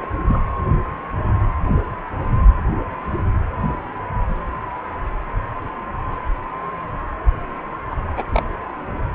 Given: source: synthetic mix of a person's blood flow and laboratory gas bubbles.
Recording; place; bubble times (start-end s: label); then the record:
Doppler ultrasound of blood flow; precordium
0.00-0.07 s: bubbles
0.28-0.44 s: bubbles
7.90-7.95 s: bubbles
8.17-8.55 s: bubbles
From the record:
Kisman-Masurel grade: 222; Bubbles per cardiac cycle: several, 3 to 8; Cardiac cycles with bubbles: 10 to 50%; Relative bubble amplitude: moderate (0.250 to 0.450); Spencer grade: 2 (many but less than half of the cardiac periods contain bubble signals, singularly or in groups); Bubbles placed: anywhere in the cardiac cycle